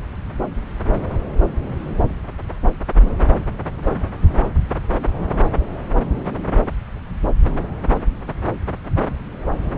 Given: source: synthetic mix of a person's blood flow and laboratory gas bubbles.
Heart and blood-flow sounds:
Doppler ultrasound of blood flow; subclavian vein
no bubbles
From the record:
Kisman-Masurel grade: 000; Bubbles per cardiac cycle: 0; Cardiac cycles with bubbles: 0%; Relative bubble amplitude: no bubbles discernible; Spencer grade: 0 (complete lack of bubble signals)

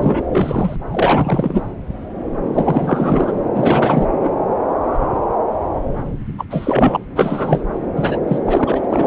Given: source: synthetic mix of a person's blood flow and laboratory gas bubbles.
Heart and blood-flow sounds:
Doppler ultrasound of blood flow; subclavian vein
0.00-0.21 s: bubbles
0.32-0.76 s: bubbles
0.91-1.62 s: bubbles
2.53-3.33 s: bubbles
3.36-3.40 s: bubbles
3.54-4.07 s: bubbles
4.23-4.30 s: bubbles
6.38-6.45 s: bubbles
6.50-6.98 s: bubbles
7.15-7.64 s: bubbles
7.96-8.18 s: bubbles
8.27-8.39 s: bubbles
8.46-9.07 s: bubbles
From the record:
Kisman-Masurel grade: 333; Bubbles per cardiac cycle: rolling drumbeat, 9 or more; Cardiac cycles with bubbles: 50 to 99%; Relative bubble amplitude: loud (0.450 to 0.775); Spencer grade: 3 (all of the cardiac periods contain showers or single bubble signals, but not dominating or overriding the cardiac motion signals); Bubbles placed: anywhere in the cardiac cycle

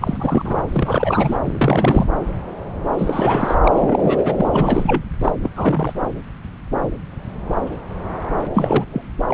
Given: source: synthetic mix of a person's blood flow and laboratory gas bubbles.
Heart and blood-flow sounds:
Doppler ultrasound of blood flow; subclavian vein
0.01-0.61 s: bubbles
0.67-1.38 s: bubbles
1.45-2.05 s: bubbles
2.97-3.55 s: bubbles
3.63-3.72 s: bubbles
3.76-4.34 s: bubbles
4.37-5.01 s: bubbles
5.23-5.32 s: bubbles
5.43-5.50 s: bubbles
5.56-5.92 s: bubbles
8.54-8.85 s: bubbles
8.92-9.02 s: bubbles
9.27-9.34 s: bubbles
From the record:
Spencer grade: 3 (all of the cardiac periods contain showers or single bubble signals, but not dominating or overriding the cardiac motion signals); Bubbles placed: anywhere in the cardiac cycle

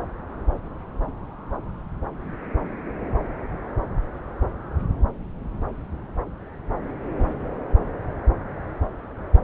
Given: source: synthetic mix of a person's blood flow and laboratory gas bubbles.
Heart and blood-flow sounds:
Doppler ultrasound of blood flow; subclavian vein
7.19-7.50 s: bubbles
From the record:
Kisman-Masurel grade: 111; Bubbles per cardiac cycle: 1 to 2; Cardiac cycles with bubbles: 1 to 10%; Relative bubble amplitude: barely perceptible (0.100 to 0.250); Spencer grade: 1 (occasional bubble signal discernible with the cardiac motion signal, with majority of cardiac periods free of bubbles); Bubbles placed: anywhere in the cardiac cycle

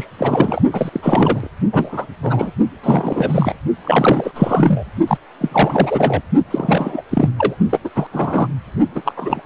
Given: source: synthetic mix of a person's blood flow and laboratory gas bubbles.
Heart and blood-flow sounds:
Doppler ultrasound of blood flow; precordium
0.00-0.07 s: bubbles
0.18-0.62 s: bubbles
0.72-0.89 s: bubbles
0.92-1.49 s: bubbles
1.73-2.06 s: bubbles
2.22-2.50 s: bubbles
2.83-3.55 s: bubbles
3.84-4.31 s: bubbles
4.34-4.83 s: bubbles
5.07-5.17 s: bubbles
5.40-6.21 s: bubbles
6.50-7.02 s: bubbles
7.11-7.29 s: bubbles
7.38-7.55 s: bubbles
7.70-7.79 s: bubbles
7.84-7.89 s: bubbles
7.96-8.07 s: bubbles
8.12-8.47 s: bubbles
8.95-9.02 s: bubbles
9.04-9.12 s: bubbles
9.16-9.40 s: bubbles
From the record:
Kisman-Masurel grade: 343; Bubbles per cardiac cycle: rolling drumbeat, 9 or more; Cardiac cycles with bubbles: 100%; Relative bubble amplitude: loud (0.450 to 0.775); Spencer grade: 3 (all of the cardiac periods contain showers or single bubble signals, but not dominating or overriding the cardiac motion signals); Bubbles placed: only in the low amplitude regions of the cardiac cycle

